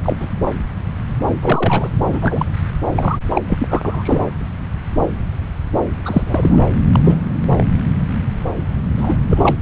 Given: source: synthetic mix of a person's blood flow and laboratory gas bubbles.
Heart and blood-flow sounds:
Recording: Doppler ultrasound of blood flow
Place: subclavian vein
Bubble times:
0.02-0.27 s: bubbles
1.41-1.89 s: bubbles
2.07-2.55 s: bubbles
2.96-3.18 s: bubbles
3.29-3.42 s: bubbles
3.47-4.22 s: bubbles
6.05-6.62 s: bubbles
6.92-7.19 s: bubbles
7.56-7.66 s: bubbles
8.97-9.15 s: bubbles
9.28-9.55 s: bubbles
From the record:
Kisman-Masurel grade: 232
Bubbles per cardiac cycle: several, 3 to 8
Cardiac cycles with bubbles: 50 to 99%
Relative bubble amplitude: moderate (0.250 to 0.450)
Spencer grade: 3 (all of the cardiac periods contain showers or single bubble signals, but not dominating or overriding the cardiac motion signals)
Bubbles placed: anywhere in the cardiac cycle

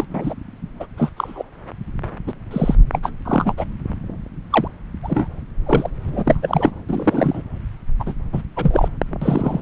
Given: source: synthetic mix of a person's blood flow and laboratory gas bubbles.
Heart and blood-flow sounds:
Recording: Doppler ultrasound of blood flow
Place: subclavian vein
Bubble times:
0.00-0.05 s: bubbles
0.14-0.34 s: bubbles
0.79-0.86 s: bubbles
0.97-1.09 s: bubbles
1.17-1.43 s: bubbles
2.27-2.33 s: bubbles
2.50-2.75 s: bubbles
2.92-3.00 s: bubbles
3.02-3.10 s: bubbles
3.25-3.54 s: bubbles
3.57-3.65 s: bubbles
4.50-4.68 s: bubbles
5.03-5.28 s: bubbles
5.65-5.90 s: bubbles
6.05-6.72 s: bubbles
6.89-7.43 s: bubbles
8.00-8.13 s: bubbles
8.32-8.42 s: bubbles
8.56-8.88 s: bubbles
9.21-9.62 s: bubbles
From the record:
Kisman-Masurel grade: 242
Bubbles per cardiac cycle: several, 3 to 8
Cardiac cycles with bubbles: 100%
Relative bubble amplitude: moderate (0.250 to 0.450)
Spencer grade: 3 (all of the cardiac periods contain showers or single bubble signals, but not dominating or overriding the cardiac motion signals)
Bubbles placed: anywhere in the cardiac cycle

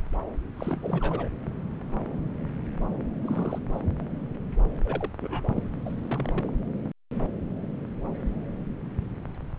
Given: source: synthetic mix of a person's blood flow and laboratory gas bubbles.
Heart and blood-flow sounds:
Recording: Doppler ultrasound of blood flow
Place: subclavian vein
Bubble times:
0.56-1.28 s: bubbles
3.22-3.58 s: bubbles
3.73-3.80 s: bubbles
4.84-5.10 s: bubbles
5.21-5.62 s: bubbles
5.85-5.95 s: bubbles
6.04-6.52 s: bubbles
From the record:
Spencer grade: 2 (many but less than half of the cardiac periods contain bubble signals, singularly or in groups)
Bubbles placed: anywhere in the cardiac cycle

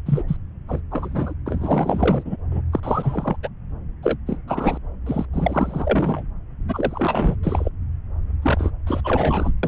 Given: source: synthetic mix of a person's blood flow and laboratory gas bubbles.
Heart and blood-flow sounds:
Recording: Doppler ultrasound of blood flow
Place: subclavian vein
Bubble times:
0.05-0.23 s: bubbles
0.28-0.37 s: bubbles
0.67-0.80 s: bubbles
0.92-1.34 s: bubbles
1.46-2.37 s: bubbles
2.50-2.62 s: bubbles
2.73-2.80 s: bubbles
2.83-3.37 s: bubbles
3.43-3.48 s: bubbles
4.02-4.17 s: bubbles
4.27-4.36 s: bubbles
4.47-4.77 s: bubbles
5.06-5.25 s: bubbles
5.33-6.22 s: bubbles
6.68-7.35 s: bubbles
7.43-7.69 s: bubbles
8.42-8.71 s: bubbles
8.87-9.01 s: bubbles
9.04-9.53 s: bubbles
9.63-9.68 s: bubbles
From the record:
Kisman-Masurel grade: 342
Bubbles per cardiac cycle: rolling drumbeat, 9 or more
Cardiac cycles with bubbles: 100%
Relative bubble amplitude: moderate (0.250 to 0.450)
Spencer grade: 3 (all of the cardiac periods contain showers or single bubble signals, but not dominating or overriding the cardiac motion signals)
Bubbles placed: anywhere in the cardiac cycle

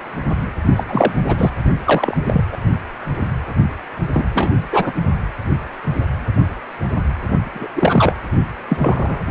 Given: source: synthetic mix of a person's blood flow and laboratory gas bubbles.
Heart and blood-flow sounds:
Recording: Doppler ultrasound of blood flow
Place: precordium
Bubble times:
0.75-0.83 s: bubbles
0.86-1.22 s: bubbles
1.28-1.51 s: bubbles
1.84-2.17 s: bubbles
2.26-2.45 s: bubbles
2.51-2.57 s: bubbles
4.13-4.28 s: bubbles
4.34-4.51 s: bubbles
4.71-4.92 s: bubbles
7.54-7.67 s: bubbles
7.75-8.13 s: bubbles
8.70-9.21 s: bubbles
From the record:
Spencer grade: 3 (all of the cardiac periods contain showers or single bubble signals, but not dominating or overriding the cardiac motion signals)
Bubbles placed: only in the low amplitude regions of the cardiac cycle

